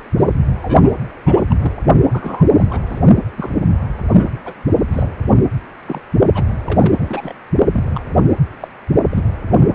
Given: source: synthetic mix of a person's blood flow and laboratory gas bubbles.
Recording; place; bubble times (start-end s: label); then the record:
Doppler ultrasound of blood flow; precordium
0.17-0.34 s: bubbles
0.62-0.95 s: bubbles
1.25-1.42 s: bubbles
1.49-1.56 s: bubbles
1.59-1.74 s: bubbles
2.12-2.44 s: bubbles
2.54-2.66 s: bubbles
2.69-2.81 s: bubbles
2.89-2.99 s: bubbles
3.36-3.50 s: bubbles
4.09-4.35 s: bubbles
4.45-4.53 s: bubbles
4.92-5.09 s: bubbles
5.86-6.01 s: bubbles
6.34-6.44 s: bubbles
6.64-7.33 s: bubbles
7.71-8.01 s: bubbles
8.61-8.68 s: bubbles
9.10-9.23 s: bubbles
9.48-9.75 s: bubbles
From the record:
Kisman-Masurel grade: 232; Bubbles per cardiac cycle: several, 3 to 8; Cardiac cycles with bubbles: 50 to 99%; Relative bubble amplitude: moderate (0.250 to 0.450); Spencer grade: 3 (all of the cardiac periods contain showers or single bubble signals, but not dominating or overriding the cardiac motion signals); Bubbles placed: only in the low amplitude regions of the cardiac cycle